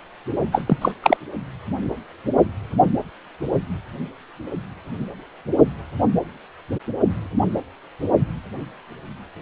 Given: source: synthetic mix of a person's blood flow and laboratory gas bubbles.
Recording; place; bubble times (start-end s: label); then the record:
Doppler ultrasound of blood flow; precordium
0.52-0.62 s: bubbles
0.66-0.77 s: bubbles
0.81-0.92 s: bubbles
1.02-1.17 s: bubbles
From the record:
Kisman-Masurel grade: 223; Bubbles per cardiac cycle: several, 3 to 8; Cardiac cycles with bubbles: 10 to 50%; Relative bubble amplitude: loud (0.450 to 0.775); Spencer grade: 2 (many but less than half of the cardiac periods contain bubble signals, singularly or in groups); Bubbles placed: only in the low amplitude regions of the cardiac cycle